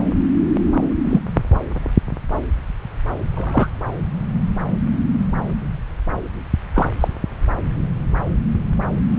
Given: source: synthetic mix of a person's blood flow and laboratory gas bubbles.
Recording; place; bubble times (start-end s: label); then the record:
Doppler ultrasound of blood flow; subclavian vein
1.04-1.20 s: bubbles
3.35-3.68 s: bubbles
6.73-6.89 s: bubbles
7.00-7.08 s: bubbles
From the record:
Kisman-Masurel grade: 123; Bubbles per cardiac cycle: 1 to 2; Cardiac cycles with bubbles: 10 to 50%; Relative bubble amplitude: loud (0.450 to 0.775); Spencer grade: 2 (many but less than half of the cardiac periods contain bubble signals, singularly or in groups); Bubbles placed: anywhere in the cardiac cycle